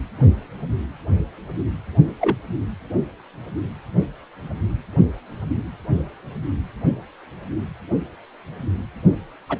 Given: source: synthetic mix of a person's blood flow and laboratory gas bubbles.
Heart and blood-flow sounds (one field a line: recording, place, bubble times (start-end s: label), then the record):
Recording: Doppler ultrasound of blood flow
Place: precordium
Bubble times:
2.21-2.36 s: bubbles
9.49-9.58 s: bubbles
From the record:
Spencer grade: 2 (many but less than half of the cardiac periods contain bubble signals, singularly or in groups)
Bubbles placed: only in the low amplitude regions of the cardiac cycle